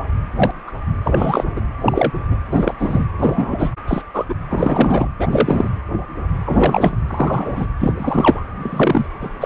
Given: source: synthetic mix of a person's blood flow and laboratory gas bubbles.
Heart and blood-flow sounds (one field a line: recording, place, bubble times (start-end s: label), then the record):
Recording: Doppler ultrasound of blood flow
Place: precordium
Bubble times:
0.36-0.51 s: bubbles
0.67-0.72 s: bubbles
1.04-1.44 s: bubbles
1.56-1.60 s: bubbles
1.81-2.12 s: bubbles
2.30-2.37 s: bubbles
2.52-2.74 s: bubbles
2.79-3.07 s: bubbles
3.18-3.71 s: bubbles
3.88-4.02 s: bubbles
4.13-4.25 s: bubbles
4.28-4.34 s: bubbles
4.50-5.08 s: bubbles
5.18-5.28 s: bubbles
5.31-5.69 s: bubbles
6.46-6.97 s: bubbles
7.07-7.67 s: bubbles
7.79-7.93 s: bubbles
7.97-8.43 s: bubbles
8.61-9.07 s: bubbles
9.21-9.46 s: bubbles
From the record:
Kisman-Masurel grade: 233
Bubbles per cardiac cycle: several, 3 to 8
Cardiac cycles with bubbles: 50 to 99%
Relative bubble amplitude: loud (0.450 to 0.775)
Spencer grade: 3 (all of the cardiac periods contain showers or single bubble signals, but not dominating or overriding the cardiac motion signals)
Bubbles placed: anywhere in the cardiac cycle